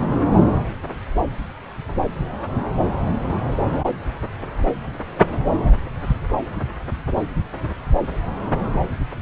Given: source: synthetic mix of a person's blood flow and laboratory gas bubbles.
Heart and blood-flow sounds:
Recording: Doppler ultrasound of blood flow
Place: subclavian vein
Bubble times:
3.34-3.39 s: bubbles
From the record:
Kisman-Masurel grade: 111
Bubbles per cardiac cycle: 1 to 2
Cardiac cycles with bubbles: 1 to 10%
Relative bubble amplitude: barely perceptible (0.100 to 0.250)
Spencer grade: 1 (occasional bubble signal discernible with the cardiac motion signal, with majority of cardiac periods free of bubbles)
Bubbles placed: anywhere in the cardiac cycle

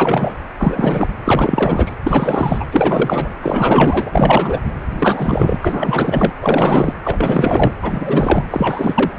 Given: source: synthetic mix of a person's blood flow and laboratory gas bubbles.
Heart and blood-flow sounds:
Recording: Doppler ultrasound of blood flow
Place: precordium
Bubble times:
0.00-0.35 s: bubbles
0.58-1.07 s: bubbles
1.25-1.91 s: bubbles
2.04-2.66 s: bubbles
2.71-3.35 s: bubbles
3.42-4.60 s: bubbles
4.99-5.58 s: bubbles
5.63-6.33 s: bubbles
6.41-6.94 s: bubbles
7.04-7.73 s: bubbles
7.82-8.44 s: bubbles
8.50-9.12 s: bubbles
From the record:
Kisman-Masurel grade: 444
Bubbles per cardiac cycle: continuous sound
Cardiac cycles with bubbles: 100%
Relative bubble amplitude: maximal (0.775 to 0.999)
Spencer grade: 4 (maximum detectable bubble signal sounding continuously throughout systole and diastole of every cardiac period, and overriding the amplitude of the normal cardiac signals)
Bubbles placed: anywhere in the cardiac cycle

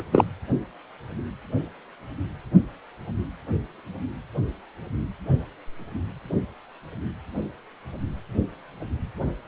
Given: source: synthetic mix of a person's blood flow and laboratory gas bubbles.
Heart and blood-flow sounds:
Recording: Doppler ultrasound of blood flow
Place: precordium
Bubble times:
0.00-0.06 s: bubbles
0.12-0.26 s: bubbles
From the record:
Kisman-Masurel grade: 223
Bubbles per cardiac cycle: several, 3 to 8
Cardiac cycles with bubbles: 10 to 50%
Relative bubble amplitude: loud (0.450 to 0.775)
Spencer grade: 2 (many but less than half of the cardiac periods contain bubble signals, singularly or in groups)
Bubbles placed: anywhere in the cardiac cycle

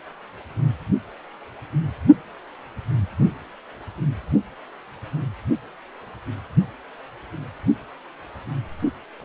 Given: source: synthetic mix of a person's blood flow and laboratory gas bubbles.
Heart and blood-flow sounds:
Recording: Doppler ultrasound of blood flow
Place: precordium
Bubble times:
9.20-9.25 s: bubbles
From the record:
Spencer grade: 2 (many but less than half of the cardiac periods contain bubble signals, singularly or in groups)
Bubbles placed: only in the low amplitude regions of the cardiac cycle

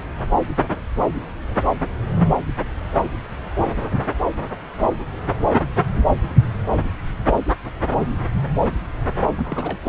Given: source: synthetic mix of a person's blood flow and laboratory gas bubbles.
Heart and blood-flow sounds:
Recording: Doppler ultrasound of blood flow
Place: subclavian vein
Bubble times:
9.38-9.89 s: bubbles
From the record:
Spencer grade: 1 (occasional bubble signal discernible with the cardiac motion signal, with majority of cardiac periods free of bubbles)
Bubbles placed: anywhere in the cardiac cycle

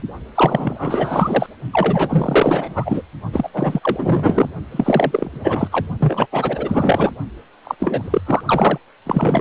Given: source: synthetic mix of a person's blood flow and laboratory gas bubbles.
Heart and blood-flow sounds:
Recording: Doppler ultrasound of blood flow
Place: precordium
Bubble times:
0.00-0.03 s: bubbles
0.34-1.47 s: bubbles
1.72-3.02 s: bubbles
3.33-3.49 s: bubbles
3.53-4.49 s: bubbles
4.71-5.67 s: bubbles
5.71-5.85 s: bubbles
6.00-6.26 s: bubbles
6.32-7.12 s: bubbles
7.64-7.75 s: bubbles
7.79-8.21 s: bubbles
8.26-8.41 s: bubbles
8.46-8.78 s: bubbles
9.06-9.41 s: bubbles
From the record:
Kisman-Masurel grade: 444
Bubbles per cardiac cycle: continuous sound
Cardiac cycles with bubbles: 100%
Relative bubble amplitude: maximal (0.775 to 0.999)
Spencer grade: 4 (maximum detectable bubble signal sounding continuously throughout systole and diastole of every cardiac period, and overriding the amplitude of the normal cardiac signals)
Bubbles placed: only in the low amplitude regions of the cardiac cycle

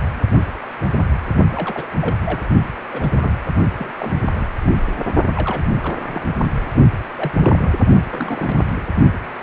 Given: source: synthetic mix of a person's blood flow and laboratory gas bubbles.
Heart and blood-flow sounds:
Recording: Doppler ultrasound of blood flow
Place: precordium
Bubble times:
1.50-1.87 s: bubbles
2.01-2.15 s: bubbles
2.25-2.46 s: bubbles
2.92-3.37 s: bubbles
3.78-3.94 s: bubbles
3.98-4.12 s: bubbles
4.30-4.55 s: bubbles
4.61-4.80 s: bubbles
5.36-5.63 s: bubbles
5.80-5.96 s: bubbles
6.03-6.26 s: bubbles
6.44-6.51 s: bubbles
7.16-7.32 s: bubbles
7.40-7.71 s: bubbles
8.10-8.88 s: bubbles
From the record:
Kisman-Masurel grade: 221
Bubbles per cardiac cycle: several, 3 to 8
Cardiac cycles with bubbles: 10 to 50%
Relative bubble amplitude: barely perceptible (0.100 to 0.250)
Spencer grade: 2 (many but less than half of the cardiac periods contain bubble signals, singularly or in groups)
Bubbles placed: only in the low amplitude regions of the cardiac cycle

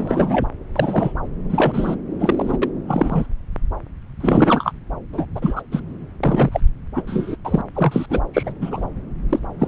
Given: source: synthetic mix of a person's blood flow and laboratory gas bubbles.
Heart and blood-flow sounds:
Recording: Doppler ultrasound of blood flow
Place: subclavian vein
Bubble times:
0.00-0.47 s: bubbles
0.75-1.13 s: bubbles
1.49-1.95 s: bubbles
2.20-2.58 s: bubbles
2.62-2.71 s: bubbles
2.87-3.27 s: bubbles
4.20-4.73 s: bubbles
5.12-5.25 s: bubbles
5.35-5.62 s: bubbles
5.71-5.80 s: bubbles
6.23-6.60 s: bubbles
6.95-7.03 s: bubbles
7.07-7.36 s: bubbles
7.45-7.62 s: bubbles
7.75-8.06 s: bubbles
8.10-8.21 s: bubbles
8.33-8.52 s: bubbles
8.61-8.86 s: bubbles
9.29-9.39 s: bubbles
9.59-9.67 s: bubbles
From the record:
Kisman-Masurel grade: 233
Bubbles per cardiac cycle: several, 3 to 8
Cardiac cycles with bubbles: 50 to 99%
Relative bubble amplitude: loud (0.450 to 0.775)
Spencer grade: 3 (all of the cardiac periods contain showers or single bubble signals, but not dominating or overriding the cardiac motion signals)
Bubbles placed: anywhere in the cardiac cycle

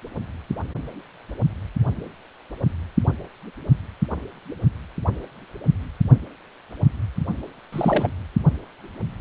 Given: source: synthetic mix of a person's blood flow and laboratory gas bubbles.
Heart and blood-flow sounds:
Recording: Doppler ultrasound of blood flow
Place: precordium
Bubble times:
7.72-8.11 s: bubbles
From the record:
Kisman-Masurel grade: 212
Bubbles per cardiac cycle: several, 3 to 8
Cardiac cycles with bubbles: 1 to 10%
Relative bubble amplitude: moderate (0.250 to 0.450)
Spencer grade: 1 (occasional bubble signal discernible with the cardiac motion signal, with majority of cardiac periods free of bubbles)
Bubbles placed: only in the low amplitude regions of the cardiac cycle

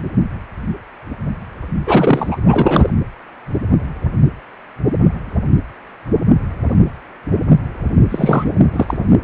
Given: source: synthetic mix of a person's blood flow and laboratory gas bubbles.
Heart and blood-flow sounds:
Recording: Doppler ultrasound of blood flow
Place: precordium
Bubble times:
1.86-2.38 s: bubbles
2.47-2.90 s: bubbles
8.10-8.54 s: bubbles
8.72-8.97 s: bubbles
From the record:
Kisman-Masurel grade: 223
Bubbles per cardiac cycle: several, 3 to 8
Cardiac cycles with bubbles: 10 to 50%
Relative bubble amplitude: loud (0.450 to 0.775)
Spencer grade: 2 (many but less than half of the cardiac periods contain bubble signals, singularly or in groups)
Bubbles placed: anywhere in the cardiac cycle

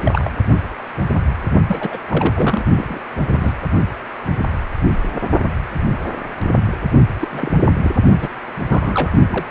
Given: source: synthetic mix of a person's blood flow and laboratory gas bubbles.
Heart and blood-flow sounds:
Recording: Doppler ultrasound of blood flow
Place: precordium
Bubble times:
0.00-0.30 s: bubbles
1.68-1.98 s: bubbles
2.08-2.65 s: bubbles
2.77-3.00 s: bubbles
3.21-3.53 s: bubbles
7.21-7.51 s: bubbles
7.84-7.91 s: bubbles
8.21-8.28 s: bubbles
8.69-9.12 s: bubbles
9.31-9.45 s: bubbles
From the record:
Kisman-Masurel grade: 232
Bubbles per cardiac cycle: several, 3 to 8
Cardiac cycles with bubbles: 50 to 99%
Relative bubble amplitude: moderate (0.250 to 0.450)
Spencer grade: 3 (all of the cardiac periods contain showers or single bubble signals, but not dominating or overriding the cardiac motion signals)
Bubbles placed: only in the low amplitude regions of the cardiac cycle

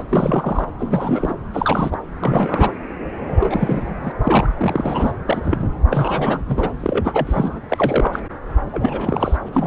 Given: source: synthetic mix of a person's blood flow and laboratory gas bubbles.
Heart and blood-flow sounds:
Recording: Doppler ultrasound of blood flow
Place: subclavian vein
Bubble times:
0.00-0.04 s: bubbles
0.09-0.68 s: bubbles
0.78-1.34 s: bubbles
1.53-1.97 s: bubbles
2.19-2.72 s: bubbles
3.26-3.96 s: bubbles
4.02-4.12 s: bubbles
4.24-5.12 s: bubbles
5.29-5.68 s: bubbles
5.90-6.41 s: bubbles
6.48-6.71 s: bubbles
6.80-7.61 s: bubbles
7.68-8.21 s: bubbles
8.72-9.37 s: bubbles
9.45-9.49 s: bubbles
9.52-9.67 s: bubbles
From the record:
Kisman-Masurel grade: 342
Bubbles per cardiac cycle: rolling drumbeat, 9 or more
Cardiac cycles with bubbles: 100%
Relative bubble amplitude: moderate (0.250 to 0.450)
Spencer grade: 3 (all of the cardiac periods contain showers or single bubble signals, but not dominating or overriding the cardiac motion signals)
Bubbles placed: anywhere in the cardiac cycle

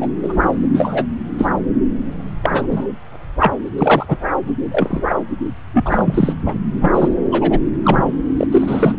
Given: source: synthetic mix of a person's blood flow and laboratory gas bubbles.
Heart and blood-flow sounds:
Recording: Doppler ultrasound of blood flow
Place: subclavian vein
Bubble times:
0.00-0.10 s: bubbles
0.23-0.33 s: bubbles
0.74-1.07 s: bubbles
1.39-1.49 s: bubbles
2.42-2.87 s: bubbles
3.39-3.54 s: bubbles
3.66-3.69 s: bubbles
3.77-4.17 s: bubbles
4.47-4.50 s: bubbles
4.70-5.03 s: bubbles
5.08-5.16 s: bubbles
5.72-6.33 s: bubbles
6.45-6.57 s: bubbles
6.81-7.09 s: bubbles
7.31-7.59 s: bubbles
7.83-8.16 s: bubbles
8.37-8.47 s: bubbles
8.52-8.95 s: bubbles
From the record:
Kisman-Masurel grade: 243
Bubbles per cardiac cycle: several, 3 to 8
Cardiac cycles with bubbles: 100%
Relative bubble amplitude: loud (0.450 to 0.775)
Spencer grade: 3 (all of the cardiac periods contain showers or single bubble signals, but not dominating or overriding the cardiac motion signals)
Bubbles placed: anywhere in the cardiac cycle

